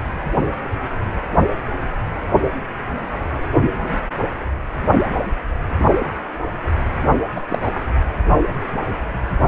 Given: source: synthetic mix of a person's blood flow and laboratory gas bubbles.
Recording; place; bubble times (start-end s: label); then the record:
Doppler ultrasound of blood flow; precordium
7.36-7.41 s: bubbles
7.48-7.80 s: bubbles
From the record:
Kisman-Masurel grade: 212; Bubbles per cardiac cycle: several, 3 to 8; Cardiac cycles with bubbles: 1 to 10%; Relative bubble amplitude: moderate (0.250 to 0.450); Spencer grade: 1 (occasional bubble signal discernible with the cardiac motion signal, with majority of cardiac periods free of bubbles); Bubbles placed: anywhere in the cardiac cycle